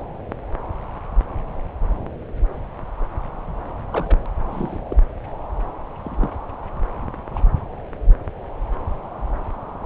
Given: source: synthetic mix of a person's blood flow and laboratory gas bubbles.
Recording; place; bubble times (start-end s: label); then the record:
Doppler ultrasound of blood flow; subclavian vein
0.00-0.04 s: bubbles
3.90-4.19 s: bubbles
4.51-4.80 s: bubbles
4.88-4.96 s: bubbles
6.03-6.31 s: bubbles
7.30-7.42 s: bubbles
From the record:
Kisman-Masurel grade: 121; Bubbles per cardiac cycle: 1 to 2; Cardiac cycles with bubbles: 10 to 50%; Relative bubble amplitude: barely perceptible (0.100 to 0.250); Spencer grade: 2 (many but less than half of the cardiac periods contain bubble signals, singularly or in groups); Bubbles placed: anywhere in the cardiac cycle